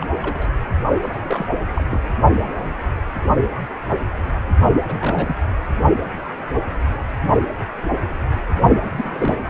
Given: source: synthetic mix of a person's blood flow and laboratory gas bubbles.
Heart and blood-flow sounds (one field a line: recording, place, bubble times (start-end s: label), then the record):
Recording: Doppler ultrasound of blood flow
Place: precordium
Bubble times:
0.01-0.06 s: bubbles
0.21-0.49 s: bubbles
1.02-1.50 s: bubbles
1.74-1.83 s: bubbles
1.88-2.01 s: bubbles
4.88-5.36 s: bubbles
8.84-8.91 s: bubbles
8.95-9.39 s: bubbles
From the record:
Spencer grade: 2 (many but less than half of the cardiac periods contain bubble signals, singularly or in groups)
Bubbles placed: only in the low amplitude regions of the cardiac cycle